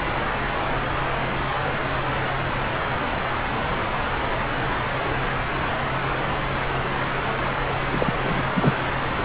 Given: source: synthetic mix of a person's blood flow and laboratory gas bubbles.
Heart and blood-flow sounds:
Doppler ultrasound of blood flow; subclavian vein
7.92-8.14 s: bubbles
8.23-8.43 s: bubbles
8.55-8.73 s: bubbles
From the record:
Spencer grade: 1 (occasional bubble signal discernible with the cardiac motion signal, with majority of cardiac periods free of bubbles); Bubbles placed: anywhere in the cardiac cycle

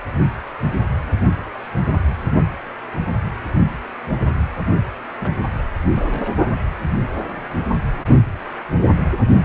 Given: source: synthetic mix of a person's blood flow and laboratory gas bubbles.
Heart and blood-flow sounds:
Doppler ultrasound of blood flow; precordium
5.08-5.12 s: bubbles
5.20-5.34 s: bubbles
5.58-5.62 s: bubbles
5.93-6.30 s: bubbles
From the record:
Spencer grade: 1 (occasional bubble signal discernible with the cardiac motion signal, with majority of cardiac periods free of bubbles); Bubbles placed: only in the low amplitude regions of the cardiac cycle

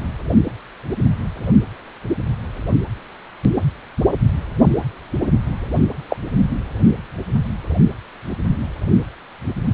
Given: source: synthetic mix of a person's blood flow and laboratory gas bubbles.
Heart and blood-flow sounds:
Doppler ultrasound of blood flow; precordium
6.08-6.17 s: bubbles
From the record:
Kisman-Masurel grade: 122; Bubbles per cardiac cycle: 1 to 2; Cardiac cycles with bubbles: 10 to 50%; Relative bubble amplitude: moderate (0.250 to 0.450); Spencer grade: 2 (many but less than half of the cardiac periods contain bubble signals, singularly or in groups); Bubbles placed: only in the low amplitude regions of the cardiac cycle

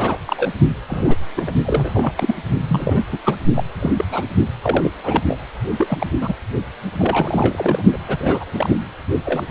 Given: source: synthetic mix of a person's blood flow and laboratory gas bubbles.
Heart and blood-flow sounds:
Doppler ultrasound of blood flow; precordium
0.00-0.18 s: bubbles
0.26-0.49 s: bubbles
0.88-1.17 s: bubbles
1.36-1.51 s: bubbles
1.65-2.36 s: bubbles
2.67-3.03 s: bubbles
3.12-3.17 s: bubbles
3.25-3.36 s: bubbles
3.54-3.63 s: bubbles
3.79-3.91 s: bubbles
3.97-4.04 s: bubbles
4.07-4.27 s: bubbles
4.62-4.90 s: bubbles
5.04-5.22 s: bubbles
5.27-5.38 s: bubbles
5.76-6.06 s: bubbles
6.21-6.33 s: bubbles
6.98-7.82 s: bubbles
7.93-7.98 s: bubbles
8.08-8.45 s: bubbles
8.53-8.76 s: bubbles
9.25-9.43 s: bubbles
From the record:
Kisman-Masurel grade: 242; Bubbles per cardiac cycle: several, 3 to 8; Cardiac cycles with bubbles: 100%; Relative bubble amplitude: moderate (0.250 to 0.450); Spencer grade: 3 (all of the cardiac periods contain showers or single bubble signals, but not dominating or overriding the cardiac motion signals); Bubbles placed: only in the low amplitude regions of the cardiac cycle

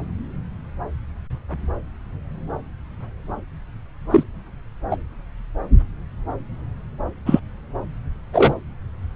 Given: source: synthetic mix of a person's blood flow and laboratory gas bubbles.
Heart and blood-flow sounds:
Doppler ultrasound of blood flow; subclavian vein
4.11-4.24 s: bubbles
4.91-4.96 s: bubbles
7.25-7.40 s: bubbles
8.33-8.55 s: bubbles
From the record:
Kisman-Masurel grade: 123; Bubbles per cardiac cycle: 1 to 2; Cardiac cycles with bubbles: 10 to 50%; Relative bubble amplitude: loud (0.450 to 0.775); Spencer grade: 2 (many but less than half of the cardiac periods contain bubble signals, singularly or in groups); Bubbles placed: anywhere in the cardiac cycle

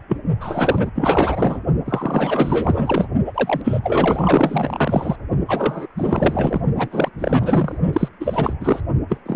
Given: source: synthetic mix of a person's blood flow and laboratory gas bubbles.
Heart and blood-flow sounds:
Doppler ultrasound of blood flow; precordium
0.08-0.17 s: bubbles
0.40-0.91 s: bubbles
0.95-1.60 s: bubbles
1.86-3.08 s: bubbles
3.25-3.62 s: bubbles
3.64-3.80 s: bubbles
3.83-5.16 s: bubbles
5.48-5.87 s: bubbles
5.97-6.61 s: bubbles
6.75-7.10 s: bubbles
7.19-7.77 s: bubbles
7.93-8.09 s: bubbles
8.20-8.55 s: bubbles
8.61-8.81 s: bubbles
9.09-9.21 s: bubbles
9.26-9.36 s: bubbles
From the record:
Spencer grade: 4 (maximum detectable bubble signal sounding continuously throughout systole and diastole of every cardiac period, and overriding the amplitude of the normal cardiac signals); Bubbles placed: only in the low amplitude regions of the cardiac cycle

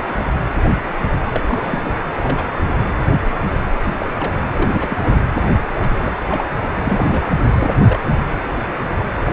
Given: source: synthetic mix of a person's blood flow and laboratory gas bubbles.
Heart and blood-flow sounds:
Doppler ultrasound of blood flow; precordium
0.00-0.04 s: bubbles
0.18-0.24 s: bubbles
1.34-1.41 s: bubbles
1.48-1.98 s: bubbles
2.18-2.46 s: bubbles
3.75-3.94 s: bubbles
3.98-4.06 s: bubbles
4.20-4.32 s: bubbles
4.54-5.27 s: bubbles
5.79-5.93 s: bubbles
6.02-6.17 s: bubbles
6.29-6.48 s: bubbles
6.83-7.22 s: bubbles
7.54-7.71 s: bubbles
7.87-7.99 s: bubbles
8.04-8.12 s: bubbles
9.24-9.33 s: bubbles
From the record:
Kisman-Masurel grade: 232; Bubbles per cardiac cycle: several, 3 to 8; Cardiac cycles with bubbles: 50 to 99%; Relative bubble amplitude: moderate (0.250 to 0.450); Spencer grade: 3 (all of the cardiac periods contain showers or single bubble signals, but not dominating or overriding the cardiac motion signals); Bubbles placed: anywhere in the cardiac cycle

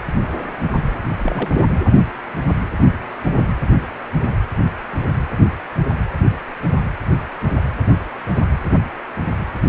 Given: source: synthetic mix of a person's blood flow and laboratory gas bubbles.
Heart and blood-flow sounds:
Doppler ultrasound of blood flow; precordium
1.07-1.72 s: bubbles
From the record:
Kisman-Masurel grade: 222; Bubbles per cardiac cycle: several, 3 to 8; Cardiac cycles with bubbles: 10 to 50%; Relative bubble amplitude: moderate (0.250 to 0.450); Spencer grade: 2 (many but less than half of the cardiac periods contain bubble signals, singularly or in groups); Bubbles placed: anywhere in the cardiac cycle

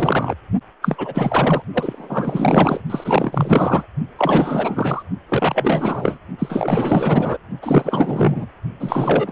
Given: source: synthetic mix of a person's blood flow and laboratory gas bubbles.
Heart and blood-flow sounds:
Doppler ultrasound of blood flow; precordium
0.00-0.35 s: bubbles
0.81-1.62 s: bubbles
1.74-2.81 s: bubbles
2.90-3.86 s: bubbles
4.18-5.03 s: bubbles
5.29-6.18 s: bubbles
6.38-7.38 s: bubbles
7.62-8.46 s: bubbles
8.80-9.32 s: bubbles
From the record:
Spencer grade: 4 (maximum detectable bubble signal sounding continuously throughout systole and diastole of every cardiac period, and overriding the amplitude of the normal cardiac signals); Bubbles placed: only in the low amplitude regions of the cardiac cycle

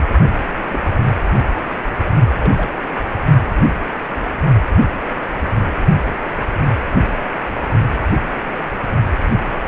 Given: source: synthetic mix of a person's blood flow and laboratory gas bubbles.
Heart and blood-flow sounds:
Doppler ultrasound of blood flow; precordium
0.71-0.81 s: bubbles
0.94-1.01 s: bubbles
2.05-2.14 s: bubbles
2.40-2.69 s: bubbles
From the record:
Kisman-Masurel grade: 121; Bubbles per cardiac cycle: 1 to 2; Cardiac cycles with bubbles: 10 to 50%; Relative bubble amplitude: barely perceptible (0.100 to 0.250); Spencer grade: 2 (many but less than half of the cardiac periods contain bubble signals, singularly or in groups); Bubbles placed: only in the low amplitude regions of the cardiac cycle

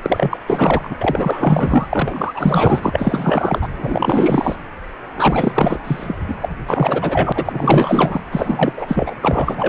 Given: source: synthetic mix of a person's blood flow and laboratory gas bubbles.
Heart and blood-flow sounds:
Doppler ultrasound of blood flow; precordium
0.02-0.38 s: bubbles
0.47-0.96 s: bubbles
1.01-3.68 s: bubbles
3.78-4.56 s: bubbles
5.17-5.79 s: bubbles
5.84-6.16 s: bubbles
6.27-6.35 s: bubbles
6.41-6.49 s: bubbles
6.67-8.21 s: bubbles
8.31-8.73 s: bubbles
8.77-9.14 s: bubbles
9.21-9.68 s: bubbles
From the record:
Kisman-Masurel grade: 444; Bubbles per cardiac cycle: continuous sound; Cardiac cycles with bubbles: 100%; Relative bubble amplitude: maximal (0.775 to 0.999); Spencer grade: 4 (maximum detectable bubble signal sounding continuously throughout systole and diastole of every cardiac period, and overriding the amplitude of the normal cardiac signals); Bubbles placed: anywhere in the cardiac cycle

